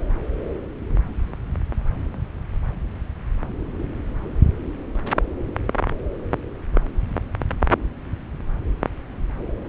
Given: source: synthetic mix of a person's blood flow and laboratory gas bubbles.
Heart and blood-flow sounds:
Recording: Doppler ultrasound of blood flow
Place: subclavian vein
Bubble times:
no bubbles
From the record:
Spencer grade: 0 (complete lack of bubble signals)

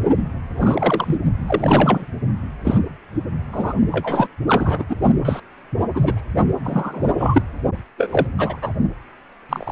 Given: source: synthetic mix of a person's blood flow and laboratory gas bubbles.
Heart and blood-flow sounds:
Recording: Doppler ultrasound of blood flow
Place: precordium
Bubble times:
0.17-0.22 s: bubbles
0.58-1.18 s: bubbles
1.47-2.06 s: bubbles
2.65-2.78 s: bubbles
3.52-3.75 s: bubbles
3.92-4.28 s: bubbles
4.47-4.85 s: bubbles
4.89-4.96 s: bubbles
5.25-5.40 s: bubbles
5.93-6.23 s: bubbles
6.64-7.13 s: bubbles
7.17-7.42 s: bubbles
7.98-8.27 s: bubbles
8.38-8.57 s: bubbles
8.62-8.71 s: bubbles
9.49-9.72 s: bubbles
From the record:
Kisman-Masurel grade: 233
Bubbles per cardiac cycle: several, 3 to 8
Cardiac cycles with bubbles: 50 to 99%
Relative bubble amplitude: loud (0.450 to 0.775)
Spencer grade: 3 (all of the cardiac periods contain showers or single bubble signals, but not dominating or overriding the cardiac motion signals)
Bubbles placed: only in the low amplitude regions of the cardiac cycle

